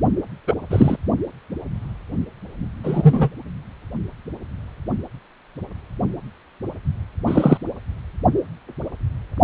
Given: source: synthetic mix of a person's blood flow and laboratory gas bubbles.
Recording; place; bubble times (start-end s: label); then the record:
Doppler ultrasound of blood flow; precordium
0.47-0.54 s: bubbles
0.70-0.97 s: bubbles
2.83-3.29 s: bubbles
7.27-7.58 s: bubbles
From the record:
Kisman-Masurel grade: 123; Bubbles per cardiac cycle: 1 to 2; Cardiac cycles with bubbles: 10 to 50%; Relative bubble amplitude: loud (0.450 to 0.775); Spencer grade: 2 (many but less than half of the cardiac periods contain bubble signals, singularly or in groups); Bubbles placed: only in the low amplitude regions of the cardiac cycle